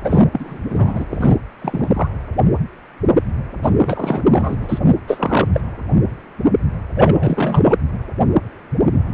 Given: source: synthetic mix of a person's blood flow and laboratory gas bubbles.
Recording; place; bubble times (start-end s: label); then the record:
Doppler ultrasound of blood flow; precordium
0.04-0.26 s: bubbles
0.32-0.59 s: bubbles
0.69-1.06 s: bubbles
1.09-1.36 s: bubbles
1.59-1.90 s: bubbles
1.94-2.07 s: bubbles
3.62-3.70 s: bubbles
3.79-4.22 s: bubbles
4.32-4.58 s: bubbles
4.61-4.79 s: bubbles
5.07-5.48 s: bubbles
5.52-5.60 s: bubbles
6.95-7.78 s: bubbles
From the record:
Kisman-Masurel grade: 333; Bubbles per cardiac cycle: rolling drumbeat, 9 or more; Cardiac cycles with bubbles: 50 to 99%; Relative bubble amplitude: loud (0.450 to 0.775); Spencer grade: 3 (all of the cardiac periods contain showers or single bubble signals, but not dominating or overriding the cardiac motion signals); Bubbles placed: anywhere in the cardiac cycle